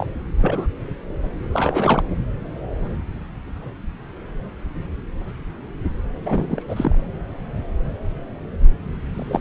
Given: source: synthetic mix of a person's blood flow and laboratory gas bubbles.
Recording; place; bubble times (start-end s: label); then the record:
Doppler ultrasound of blood flow; subclavian vein
0.00-0.06 s: bubbles
0.41-0.68 s: bubbles
1.52-2.03 s: bubbles
6.20-6.63 s: bubbles
6.68-6.96 s: bubbles
9.14-9.41 s: bubbles
From the record:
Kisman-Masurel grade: 222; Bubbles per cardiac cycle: several, 3 to 8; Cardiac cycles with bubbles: 10 to 50%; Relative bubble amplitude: moderate (0.250 to 0.450); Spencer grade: 2 (many but less than half of the cardiac periods contain bubble signals, singularly or in groups); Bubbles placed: anywhere in the cardiac cycle